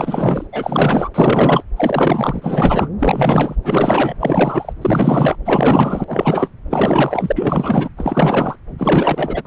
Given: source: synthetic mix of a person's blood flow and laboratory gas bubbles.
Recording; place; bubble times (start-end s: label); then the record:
Doppler ultrasound of blood flow; subclavian vein
0.00-0.47 s: bubbles
0.52-1.09 s: bubbles
1.14-1.64 s: bubbles
1.76-2.89 s: bubbles
2.99-3.56 s: bubbles
3.63-4.14 s: bubbles
4.19-4.73 s: bubbles
4.81-5.36 s: bubbles
5.45-6.04 s: bubbles
6.07-6.49 s: bubbles
6.70-7.32 s: bubbles
7.35-7.89 s: bubbles
7.97-8.55 s: bubbles
8.78-9.42 s: bubbles
9.45-9.47 s: bubbles
From the record:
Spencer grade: 4 (maximum detectable bubble signal sounding continuously throughout systole and diastole of every cardiac period, and overriding the amplitude of the normal cardiac signals); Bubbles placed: anywhere in the cardiac cycle